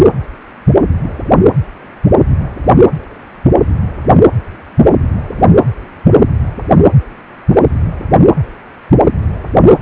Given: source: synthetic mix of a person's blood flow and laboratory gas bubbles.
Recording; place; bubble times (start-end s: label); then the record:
Doppler ultrasound of blood flow; precordium
6.58-6.62 s: bubbles
From the record:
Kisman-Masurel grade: 111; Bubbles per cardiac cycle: 1 to 2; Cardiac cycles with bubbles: 1 to 10%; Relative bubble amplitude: barely perceptible (0.100 to 0.250); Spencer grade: 1 (occasional bubble signal discernible with the cardiac motion signal, with majority of cardiac periods free of bubbles); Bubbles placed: anywhere in the cardiac cycle